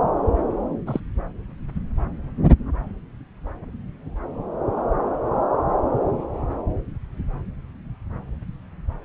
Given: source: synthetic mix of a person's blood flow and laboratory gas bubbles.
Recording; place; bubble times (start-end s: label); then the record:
Doppler ultrasound of blood flow; subclavian vein
0.86-1.00 s: bubbles
From the record:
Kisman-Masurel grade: 112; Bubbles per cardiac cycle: 1 to 2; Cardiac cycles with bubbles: 1 to 10%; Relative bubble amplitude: moderate (0.250 to 0.450); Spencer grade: 1 (occasional bubble signal discernible with the cardiac motion signal, with majority of cardiac periods free of bubbles); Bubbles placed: anywhere in the cardiac cycle